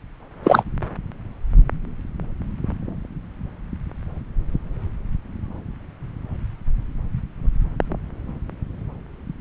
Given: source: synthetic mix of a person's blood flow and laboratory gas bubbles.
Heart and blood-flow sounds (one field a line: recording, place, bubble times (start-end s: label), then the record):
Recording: Doppler ultrasound of blood flow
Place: subclavian vein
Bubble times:
0.43-0.63 s: bubbles
From the record:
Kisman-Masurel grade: 213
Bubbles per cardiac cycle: several, 3 to 8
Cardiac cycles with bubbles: 1 to 10%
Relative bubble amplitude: loud (0.450 to 0.775)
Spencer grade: 1 (occasional bubble signal discernible with the cardiac motion signal, with majority of cardiac periods free of bubbles)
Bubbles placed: anywhere in the cardiac cycle